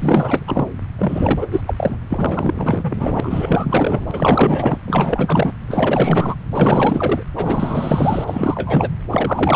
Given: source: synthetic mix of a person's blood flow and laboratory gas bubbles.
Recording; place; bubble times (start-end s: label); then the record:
Doppler ultrasound of blood flow; subclavian vein
0.00-0.68 s: bubbles
0.97-1.47 s: bubbles
1.52-1.62 s: bubbles
1.66-1.97 s: bubbles
2.09-4.79 s: bubbles
4.87-5.53 s: bubbles
5.68-6.35 s: bubbles
6.52-7.23 s: bubbles
7.35-8.25 s: bubbles
8.27-8.91 s: bubbles
9.11-9.56 s: bubbles
From the record:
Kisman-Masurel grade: 444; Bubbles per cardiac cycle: continuous sound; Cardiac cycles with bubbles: 100%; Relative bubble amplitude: maximal (0.775 to 0.999); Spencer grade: 4 (maximum detectable bubble signal sounding continuously throughout systole and diastole of every cardiac period, and overriding the amplitude of the normal cardiac signals); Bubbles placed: anywhere in the cardiac cycle